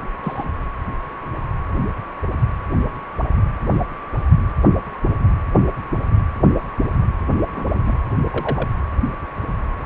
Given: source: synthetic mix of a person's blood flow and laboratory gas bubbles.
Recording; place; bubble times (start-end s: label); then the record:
Doppler ultrasound of blood flow; precordium
0.22-0.44 s: bubbles
7.53-7.98 s: bubbles
8.32-8.68 s: bubbles
From the record:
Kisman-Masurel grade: 121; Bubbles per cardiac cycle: 1 to 2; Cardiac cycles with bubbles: 10 to 50%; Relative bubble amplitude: barely perceptible (0.100 to 0.250); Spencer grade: 2 (many but less than half of the cardiac periods contain bubble signals, singularly or in groups); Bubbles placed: anywhere in the cardiac cycle